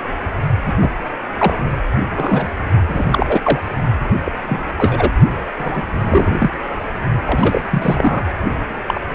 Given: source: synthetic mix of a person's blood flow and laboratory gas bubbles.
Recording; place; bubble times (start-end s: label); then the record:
Doppler ultrasound of blood flow; precordium
0.66-0.73 s: bubbles
0.81-0.90 s: bubbles
1.38-1.54 s: bubbles
2.15-2.48 s: bubbles
2.88-3.60 s: bubbles
4.25-4.32 s: bubbles
4.46-4.64 s: bubbles
4.78-5.11 s: bubbles
5.57-5.83 s: bubbles
6.01-6.50 s: bubbles
7.25-8.24 s: bubbles
8.85-9.07 s: bubbles
From the record:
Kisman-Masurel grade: 233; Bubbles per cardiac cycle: several, 3 to 8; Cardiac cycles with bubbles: 50 to 99%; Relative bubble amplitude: loud (0.450 to 0.775); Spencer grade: 3 (all of the cardiac periods contain showers or single bubble signals, but not dominating or overriding the cardiac motion signals); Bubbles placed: only in the low amplitude regions of the cardiac cycle